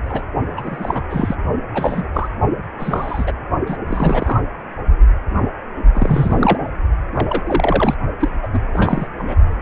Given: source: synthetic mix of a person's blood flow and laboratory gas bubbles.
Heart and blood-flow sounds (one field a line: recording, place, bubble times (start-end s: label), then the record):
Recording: Doppler ultrasound of blood flow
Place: precordium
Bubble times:
0.05-0.24 s: bubbles
0.57-1.02 s: bubbles
1.09-1.35 s: bubbles
1.74-2.06 s: bubbles
2.13-2.29 s: bubbles
2.79-3.32 s: bubbles
3.66-3.77 s: bubbles
3.87-4.40 s: bubbles
5.93-6.58 s: bubbles
7.13-7.42 s: bubbles
7.46-7.95 s: bubbles
8.20-8.30 s: bubbles
8.42-8.47 s: bubbles
8.53-8.59 s: bubbles
8.73-9.07 s: bubbles
9.18-9.36 s: bubbles
From the record:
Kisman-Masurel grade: 232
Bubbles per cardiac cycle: several, 3 to 8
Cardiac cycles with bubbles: 50 to 99%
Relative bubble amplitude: moderate (0.250 to 0.450)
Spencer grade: 3 (all of the cardiac periods contain showers or single bubble signals, but not dominating or overriding the cardiac motion signals)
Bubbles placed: only in the low amplitude regions of the cardiac cycle